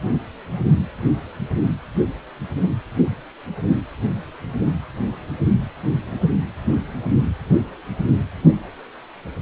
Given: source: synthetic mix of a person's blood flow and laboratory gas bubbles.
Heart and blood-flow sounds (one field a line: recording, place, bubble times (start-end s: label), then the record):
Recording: Doppler ultrasound of blood flow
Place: precordium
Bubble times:
no bubbles
From the record:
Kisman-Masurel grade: 000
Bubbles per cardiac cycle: 0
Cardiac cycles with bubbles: 0%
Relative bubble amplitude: no bubbles discernible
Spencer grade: 0 (complete lack of bubble signals)